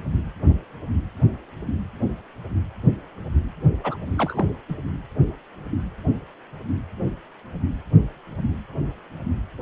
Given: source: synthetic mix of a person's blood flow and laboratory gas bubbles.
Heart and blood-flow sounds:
Doppler ultrasound of blood flow; precordium
3.83-3.98 s: bubbles
4.17-4.50 s: bubbles
4.69-4.75 s: bubbles
From the record:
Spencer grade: 1 (occasional bubble signal discernible with the cardiac motion signal, with majority of cardiac periods free of bubbles); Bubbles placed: only in the low amplitude regions of the cardiac cycle

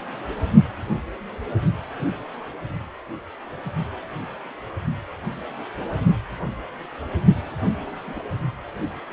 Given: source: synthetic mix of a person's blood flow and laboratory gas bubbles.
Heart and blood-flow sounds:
Doppler ultrasound of blood flow; precordium
8.04-8.20 s: bubbles
From the record:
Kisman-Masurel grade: 111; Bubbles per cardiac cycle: 1 to 2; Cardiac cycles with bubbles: 1 to 10%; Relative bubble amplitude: barely perceptible (0.100 to 0.250); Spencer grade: 1 (occasional bubble signal discernible with the cardiac motion signal, with majority of cardiac periods free of bubbles); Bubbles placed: only in the low amplitude regions of the cardiac cycle

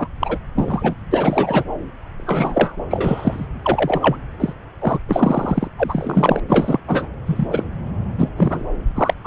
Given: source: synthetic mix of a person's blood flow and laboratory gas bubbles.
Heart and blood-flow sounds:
Doppler ultrasound of blood flow; subclavian vein
0.00-0.08 s: bubbles
0.21-0.39 s: bubbles
0.55-0.95 s: bubbles
1.11-1.64 s: bubbles
2.19-2.76 s: bubbles
2.90-3.47 s: bubbles
3.62-4.17 s: bubbles
4.40-4.53 s: bubbles
4.81-4.99 s: bubbles
5.08-5.67 s: bubbles
5.77-6.40 s: bubbles
6.49-6.80 s: bubbles
6.88-7.08 s: bubbles
7.26-7.47 s: bubbles
7.50-7.64 s: bubbles
8.18-8.29 s: bubbles
8.37-8.65 s: bubbles
8.96-9.14 s: bubbles
9.24-9.26 s: bubbles
From the record:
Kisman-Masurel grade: 243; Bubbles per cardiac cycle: several, 3 to 8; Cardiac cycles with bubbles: 100%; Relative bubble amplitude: loud (0.450 to 0.775); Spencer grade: 3 (all of the cardiac periods contain showers or single bubble signals, but not dominating or overriding the cardiac motion signals); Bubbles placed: anywhere in the cardiac cycle

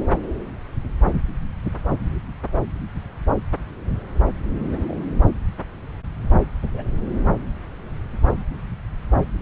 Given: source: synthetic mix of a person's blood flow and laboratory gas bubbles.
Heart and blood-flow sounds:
Doppler ultrasound of blood flow; subclavian vein
4.72-4.79 s: bubbles
4.81-4.98 s: bubbles
6.74-6.83 s: bubbles
From the record:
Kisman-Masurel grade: 121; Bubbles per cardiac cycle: 1 to 2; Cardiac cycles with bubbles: 10 to 50%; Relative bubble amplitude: barely perceptible (0.100 to 0.250); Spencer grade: 2 (many but less than half of the cardiac periods contain bubble signals, singularly or in groups); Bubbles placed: anywhere in the cardiac cycle

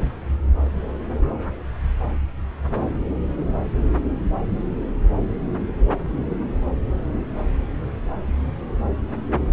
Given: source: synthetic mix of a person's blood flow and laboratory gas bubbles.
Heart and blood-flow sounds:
Doppler ultrasound of blood flow; subclavian vein
no bubbles
From the record:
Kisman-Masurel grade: 000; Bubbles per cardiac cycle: 0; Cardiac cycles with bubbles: 0%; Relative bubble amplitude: no bubbles discernible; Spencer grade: 0 (complete lack of bubble signals)

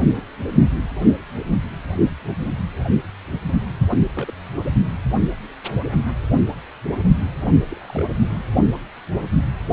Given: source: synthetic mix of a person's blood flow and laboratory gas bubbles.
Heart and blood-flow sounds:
Doppler ultrasound of blood flow; precordium
3.88-3.99 s: bubbles
4.15-4.32 s: bubbles
7.69-8.07 s: bubbles
From the record:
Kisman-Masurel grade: 121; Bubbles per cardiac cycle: 1 to 2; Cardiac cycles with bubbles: 10 to 50%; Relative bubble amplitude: barely perceptible (0.100 to 0.250); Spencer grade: 2 (many but less than half of the cardiac periods contain bubble signals, singularly or in groups); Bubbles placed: only in the low amplitude regions of the cardiac cycle

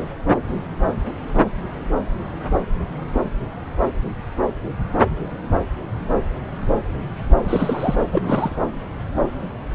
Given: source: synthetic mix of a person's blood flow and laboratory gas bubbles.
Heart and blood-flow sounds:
Doppler ultrasound of blood flow; subclavian vein
7.44-7.95 s: bubbles
8.12-8.56 s: bubbles
From the record:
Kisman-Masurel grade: 212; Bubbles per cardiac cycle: several, 3 to 8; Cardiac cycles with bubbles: 1 to 10%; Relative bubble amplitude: moderate (0.250 to 0.450); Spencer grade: 1 (occasional bubble signal discernible with the cardiac motion signal, with majority of cardiac periods free of bubbles); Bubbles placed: anywhere in the cardiac cycle

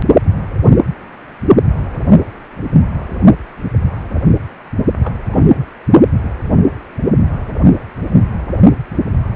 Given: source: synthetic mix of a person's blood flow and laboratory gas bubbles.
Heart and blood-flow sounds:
Doppler ultrasound of blood flow; precordium
5.03-5.19 s: bubbles
5.28-5.66 s: bubbles
From the record:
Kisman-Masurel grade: 211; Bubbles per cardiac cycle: several, 3 to 8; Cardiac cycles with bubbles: 1 to 10%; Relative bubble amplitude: barely perceptible (0.100 to 0.250); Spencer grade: 1 (occasional bubble signal discernible with the cardiac motion signal, with majority of cardiac periods free of bubbles); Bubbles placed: only in the low amplitude regions of the cardiac cycle

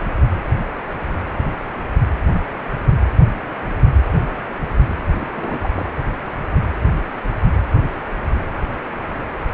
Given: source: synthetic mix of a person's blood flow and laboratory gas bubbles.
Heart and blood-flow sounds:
Doppler ultrasound of blood flow; precordium
5.18-5.28 s: bubbles
5.36-5.69 s: bubbles
5.75-5.92 s: bubbles
From the record:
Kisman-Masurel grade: 211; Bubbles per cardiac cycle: several, 3 to 8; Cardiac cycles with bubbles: 1 to 10%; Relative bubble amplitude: barely perceptible (0.100 to 0.250); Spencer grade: 1 (occasional bubble signal discernible with the cardiac motion signal, with majority of cardiac periods free of bubbles); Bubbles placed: anywhere in the cardiac cycle

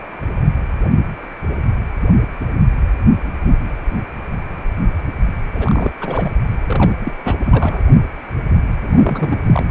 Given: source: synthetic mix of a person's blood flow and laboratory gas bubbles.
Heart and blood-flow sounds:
Doppler ultrasound of blood flow; precordium
5.53-5.92 s: bubbles
6.00-6.31 s: bubbles
6.67-6.93 s: bubbles
7.02-7.13 s: bubbles
7.25-7.35 s: bubbles
7.46-7.83 s: bubbles
8.81-9.44 s: bubbles
9.46-9.65 s: bubbles
From the record:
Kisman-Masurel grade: 332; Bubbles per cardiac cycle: rolling drumbeat, 9 or more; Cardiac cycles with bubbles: 50 to 99%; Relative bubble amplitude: moderate (0.250 to 0.450); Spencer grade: 3 (all of the cardiac periods contain showers or single bubble signals, but not dominating or overriding the cardiac motion signals); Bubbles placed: anywhere in the cardiac cycle

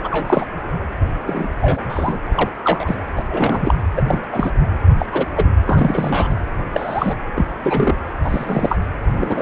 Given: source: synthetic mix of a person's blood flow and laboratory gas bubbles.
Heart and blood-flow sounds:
Doppler ultrasound of blood flow; precordium
0.03-0.46 s: bubbles
1.27-1.49 s: bubbles
1.60-1.80 s: bubbles
1.88-2.19 s: bubbles
2.36-2.50 s: bubbles
2.63-2.96 s: bubbles
3.15-3.24 s: bubbles
3.29-3.74 s: bubbles
3.96-4.25 s: bubbles
4.32-4.54 s: bubbles
4.98-5.06 s: bubbles
5.12-5.25 s: bubbles
5.36-5.45 s: bubbles
5.65-6.28 s: bubbles
6.73-7.15 s: bubbles
7.37-7.45 s: bubbles
7.63-7.95 s: bubbles
8.23-8.78 s: bubbles
9.18-9.42 s: bubbles
From the record:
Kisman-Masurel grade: 243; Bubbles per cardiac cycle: several, 3 to 8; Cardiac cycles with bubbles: 100%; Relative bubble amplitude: loud (0.450 to 0.775); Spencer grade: 3 (all of the cardiac periods contain showers or single bubble signals, but not dominating or overriding the cardiac motion signals); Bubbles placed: anywhere in the cardiac cycle

